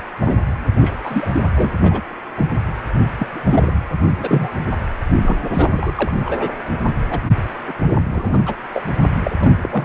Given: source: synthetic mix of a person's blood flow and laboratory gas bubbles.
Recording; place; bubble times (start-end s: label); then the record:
Doppler ultrasound of blood flow; precordium
0.21-0.34 s: bubbles
0.80-0.94 s: bubbles
1.03-1.28 s: bubbles
1.33-1.43 s: bubbles
1.54-1.71 s: bubbles
1.82-2.01 s: bubbles
2.36-2.46 s: bubbles
3.19-3.27 s: bubbles
3.31-3.73 s: bubbles
4.19-4.49 s: bubbles
5.21-5.36 s: bubbles
5.53-5.69 s: bubbles
5.73-5.92 s: bubbles
5.97-6.12 s: bubbles
6.25-6.55 s: bubbles
7.10-7.20 s: bubbles
7.68-7.73 s: bubbles
8.11-8.41 s: bubbles
8.45-8.55 s: bubbles
8.74-8.85 s: bubbles
9.23-9.36 s: bubbles
9.39-9.55 s: bubbles
9.61-9.85 s: bubbles
From the record:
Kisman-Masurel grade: 242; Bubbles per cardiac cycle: several, 3 to 8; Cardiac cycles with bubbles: 100%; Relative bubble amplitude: moderate (0.250 to 0.450); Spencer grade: 3 (all of the cardiac periods contain showers or single bubble signals, but not dominating or overriding the cardiac motion signals); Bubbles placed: anywhere in the cardiac cycle